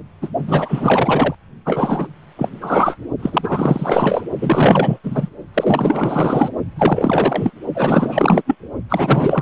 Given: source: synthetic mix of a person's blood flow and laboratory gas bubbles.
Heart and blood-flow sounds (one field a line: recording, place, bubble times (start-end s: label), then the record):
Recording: Doppler ultrasound of blood flow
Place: precordium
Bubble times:
0.22-0.28 s: bubbles
0.47-1.35 s: bubbles
1.65-2.07 s: bubbles
2.38-2.49 s: bubbles
2.61-2.96 s: bubbles
3.19-4.23 s: bubbles
4.41-4.98 s: bubbles
5.04-5.29 s: bubbles
5.54-6.50 s: bubbles
6.75-7.51 s: bubbles
7.74-8.42 s: bubbles
8.46-8.55 s: bubbles
8.89-9.42 s: bubbles
From the record:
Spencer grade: 4 (maximum detectable bubble signal sounding continuously throughout systole and diastole of every cardiac period, and overriding the amplitude of the normal cardiac signals)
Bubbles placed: only in the low amplitude regions of the cardiac cycle